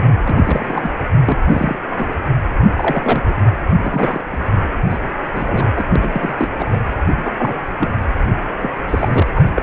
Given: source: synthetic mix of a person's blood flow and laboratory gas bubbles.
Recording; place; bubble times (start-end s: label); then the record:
Doppler ultrasound of blood flow; precordium
0.23-0.90 s: bubbles
1.25-1.79 s: bubbles
1.98-2.05 s: bubbles
2.75-3.23 s: bubbles
3.27-3.34 s: bubbles
3.81-4.21 s: bubbles
4.32-4.41 s: bubbles
4.90-4.98 s: bubbles
5.35-5.86 s: bubbles
5.96-6.48 s: bubbles
6.59-6.79 s: bubbles
7.17-7.32 s: bubbles
7.37-7.54 s: bubbles
7.79-7.91 s: bubbles
8.62-8.70 s: bubbles
8.87-9.26 s: bubbles
9.34-9.42 s: bubbles
9.55-9.63 s: bubbles
From the record:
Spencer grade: 3 (all of the cardiac periods contain showers or single bubble signals, but not dominating or overriding the cardiac motion signals); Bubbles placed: anywhere in the cardiac cycle